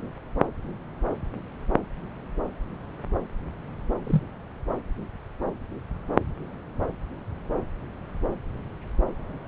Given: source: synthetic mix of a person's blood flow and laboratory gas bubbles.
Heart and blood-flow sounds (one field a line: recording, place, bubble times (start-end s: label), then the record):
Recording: Doppler ultrasound of blood flow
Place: subclavian vein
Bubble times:
4.07-4.22 s: bubbles
From the record:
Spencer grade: 1 (occasional bubble signal discernible with the cardiac motion signal, with majority of cardiac periods free of bubbles)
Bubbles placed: anywhere in the cardiac cycle